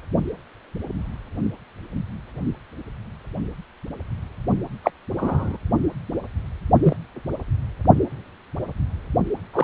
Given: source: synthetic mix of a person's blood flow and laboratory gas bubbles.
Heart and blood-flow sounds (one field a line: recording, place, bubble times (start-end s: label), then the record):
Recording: Doppler ultrasound of blood flow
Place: precordium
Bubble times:
4.83-4.91 s: bubbles
5.17-5.57 s: bubbles
6.82-6.96 s: bubbles
9.54-9.64 s: bubbles
From the record:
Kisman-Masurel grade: 123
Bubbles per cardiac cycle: 1 to 2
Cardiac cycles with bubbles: 10 to 50%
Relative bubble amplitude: loud (0.450 to 0.775)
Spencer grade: 2 (many but less than half of the cardiac periods contain bubble signals, singularly or in groups)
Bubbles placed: only in the low amplitude regions of the cardiac cycle